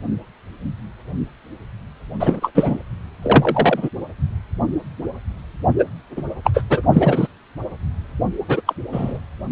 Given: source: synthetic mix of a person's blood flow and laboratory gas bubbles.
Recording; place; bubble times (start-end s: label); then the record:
Doppler ultrasound of blood flow; precordium
2.19-2.51 s: bubbles
2.54-2.79 s: bubbles
3.23-3.89 s: bubbles
5.79-5.85 s: bubbles
6.16-6.22 s: bubbles
6.44-6.50 s: bubbles
6.54-6.63 s: bubbles
6.70-6.82 s: bubbles
6.93-7.27 s: bubbles
8.48-8.61 s: bubbles
8.67-8.73 s: bubbles
8.92-9.19 s: bubbles
From the record:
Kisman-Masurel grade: 233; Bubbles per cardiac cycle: several, 3 to 8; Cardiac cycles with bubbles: 50 to 99%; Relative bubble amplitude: loud (0.450 to 0.775); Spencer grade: 3 (all of the cardiac periods contain showers or single bubble signals, but not dominating or overriding the cardiac motion signals); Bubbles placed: only in the low amplitude regions of the cardiac cycle